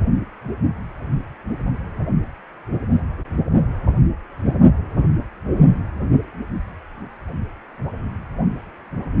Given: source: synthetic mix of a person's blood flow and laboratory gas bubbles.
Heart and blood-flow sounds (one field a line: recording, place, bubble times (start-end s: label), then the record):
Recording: Doppler ultrasound of blood flow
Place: precordium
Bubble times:
8.96-9.03 s: bubbles
From the record:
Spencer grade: 2 (many but less than half of the cardiac periods contain bubble signals, singularly or in groups)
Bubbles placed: only in the low amplitude regions of the cardiac cycle